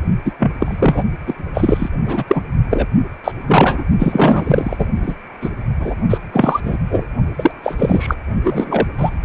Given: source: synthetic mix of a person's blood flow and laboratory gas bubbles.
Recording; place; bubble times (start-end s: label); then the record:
Doppler ultrasound of blood flow; precordium
0.25-0.32 s: bubbles
0.39-0.52 s: bubbles
0.59-1.04 s: bubbles
1.27-1.33 s: bubbles
1.54-1.90 s: bubbles
2.05-2.24 s: bubbles
2.27-2.44 s: bubbles
2.70-2.87 s: bubbles
3.24-3.31 s: bubbles
3.47-3.84 s: bubbles
3.99-4.86 s: bubbles
5.02-5.14 s: bubbles
5.41-5.49 s: bubbles
5.79-5.95 s: bubbles
6.09-6.18 s: bubbles
6.33-6.60 s: bubbles
6.65-6.77 s: bubbles
6.90-7.05 s: bubbles
7.38-7.51 s: bubbles
7.63-7.75 s: bubbles
7.78-8.15 s: bubbles
8.44-8.87 s: bubbles
8.98-9.11 s: bubbles
From the record:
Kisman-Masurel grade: 243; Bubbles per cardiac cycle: several, 3 to 8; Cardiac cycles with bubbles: 100%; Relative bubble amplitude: loud (0.450 to 0.775); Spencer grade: 3 (all of the cardiac periods contain showers or single bubble signals, but not dominating or overriding the cardiac motion signals); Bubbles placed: only in the low amplitude regions of the cardiac cycle